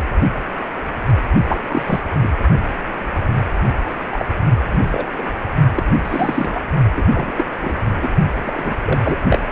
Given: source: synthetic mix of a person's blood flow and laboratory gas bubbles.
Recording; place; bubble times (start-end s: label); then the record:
Doppler ultrasound of blood flow; precordium
1.48-1.60 s: bubbles
1.67-1.82 s: bubbles
1.86-2.00 s: bubbles
2.22-2.28 s: bubbles
3.90-3.95 s: bubbles
4.11-4.25 s: bubbles
4.71-5.06 s: bubbles
5.13-5.34 s: bubbles
5.75-5.83 s: bubbles
6.04-6.62 s: bubbles
6.95-7.03 s: bubbles
7.14-7.32 s: bubbles
7.37-7.45 s: bubbles
7.61-7.73 s: bubbles
8.02-8.08 s: bubbles
8.45-8.76 s: bubbles
8.85-8.99 s: bubbles
9.02-9.18 s: bubbles
9.29-9.38 s: bubbles
From the record:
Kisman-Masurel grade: 232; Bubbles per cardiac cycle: several, 3 to 8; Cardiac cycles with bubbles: 50 to 99%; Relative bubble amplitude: moderate (0.250 to 0.450); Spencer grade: 3 (all of the cardiac periods contain showers or single bubble signals, but not dominating or overriding the cardiac motion signals); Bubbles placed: only in the low amplitude regions of the cardiac cycle